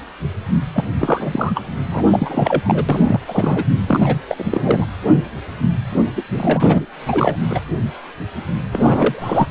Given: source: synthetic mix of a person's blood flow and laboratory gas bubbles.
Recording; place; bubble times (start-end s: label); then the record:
Doppler ultrasound of blood flow; precordium
0.73-0.84 s: bubbles
0.99-1.64 s: bubbles
1.91-2.60 s: bubbles
2.66-2.84 s: bubbles
2.89-3.20 s: bubbles
3.27-3.65 s: bubbles
3.88-4.16 s: bubbles
4.29-4.85 s: bubbles
6.16-6.22 s: bubbles
6.31-6.85 s: bubbles
7.07-7.36 s: bubbles
7.50-7.61 s: bubbles
8.72-9.48 s: bubbles
From the record:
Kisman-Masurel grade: 333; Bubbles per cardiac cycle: rolling drumbeat, 9 or more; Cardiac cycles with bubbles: 50 to 99%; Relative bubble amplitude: loud (0.450 to 0.775); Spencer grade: 3 (all of the cardiac periods contain showers or single bubble signals, but not dominating or overriding the cardiac motion signals); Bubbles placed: anywhere in the cardiac cycle